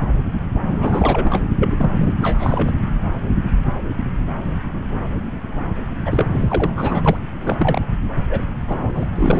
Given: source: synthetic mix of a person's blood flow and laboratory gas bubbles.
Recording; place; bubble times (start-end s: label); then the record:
Doppler ultrasound of blood flow; subclavian vein
0.69-1.44 s: bubbles
1.59-2.13 s: bubbles
2.21-2.72 s: bubbles
6.05-6.25 s: bubbles
6.30-7.17 s: bubbles
7.41-7.81 s: bubbles
8.29-8.45 s: bubbles
8.67-9.09 s: bubbles
9.15-9.40 s: bubbles
From the record:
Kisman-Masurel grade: 332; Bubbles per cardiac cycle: rolling drumbeat, 9 or more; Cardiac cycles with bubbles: 50 to 99%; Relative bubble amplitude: moderate (0.250 to 0.450); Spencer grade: 3 (all of the cardiac periods contain showers or single bubble signals, but not dominating or overriding the cardiac motion signals); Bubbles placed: anywhere in the cardiac cycle